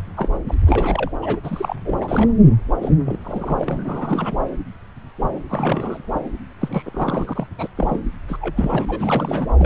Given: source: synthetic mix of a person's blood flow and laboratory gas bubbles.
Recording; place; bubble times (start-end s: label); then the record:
Doppler ultrasound of blood flow; subclavian vein
0.16-0.28 s: bubbles
0.45-0.54 s: bubbles
0.66-1.11 s: bubbles
1.22-1.40 s: bubbles
1.43-1.76 s: bubbles
1.85-2.33 s: bubbles
2.81-2.91 s: bubbles
3.05-3.19 s: bubbles
3.24-4.35 s: bubbles
5.49-6.08 s: bubbles
6.14-6.20 s: bubbles
6.60-6.83 s: bubbles
6.85-7.46 s: bubbles
7.58-7.68 s: bubbles
7.77-8.00 s: bubbles
8.28-8.86 s: bubbles
8.88-9.46 s: bubbles
9.58-9.66 s: bubbles
From the record:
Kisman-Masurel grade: 332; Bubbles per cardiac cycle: rolling drumbeat, 9 or more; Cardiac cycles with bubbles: 50 to 99%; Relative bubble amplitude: moderate (0.250 to 0.450); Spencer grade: 3 (all of the cardiac periods contain showers or single bubble signals, but not dominating or overriding the cardiac motion signals); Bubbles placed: anywhere in the cardiac cycle